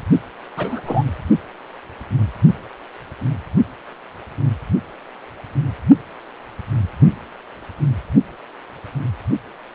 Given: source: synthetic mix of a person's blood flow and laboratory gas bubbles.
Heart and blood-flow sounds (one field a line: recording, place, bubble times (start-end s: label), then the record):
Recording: Doppler ultrasound of blood flow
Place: precordium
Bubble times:
0.57-0.81 s: bubbles
0.85-1.03 s: bubbles
From the record:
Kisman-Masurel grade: 113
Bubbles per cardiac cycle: 1 to 2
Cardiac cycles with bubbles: 1 to 10%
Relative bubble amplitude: loud (0.450 to 0.775)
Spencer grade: 1 (occasional bubble signal discernible with the cardiac motion signal, with majority of cardiac periods free of bubbles)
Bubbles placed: only in the low amplitude regions of the cardiac cycle